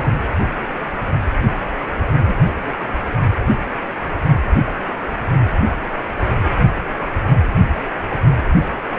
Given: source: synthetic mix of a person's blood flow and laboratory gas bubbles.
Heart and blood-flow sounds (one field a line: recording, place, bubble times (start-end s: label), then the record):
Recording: Doppler ultrasound of blood flow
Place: precordium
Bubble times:
0.00-0.11 s: bubbles
2.21-2.51 s: bubbles
From the record:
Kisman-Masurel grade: 121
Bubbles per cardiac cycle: 1 to 2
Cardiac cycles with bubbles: 10 to 50%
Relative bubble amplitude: barely perceptible (0.100 to 0.250)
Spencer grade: 2 (many but less than half of the cardiac periods contain bubble signals, singularly or in groups)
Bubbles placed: only in the low amplitude regions of the cardiac cycle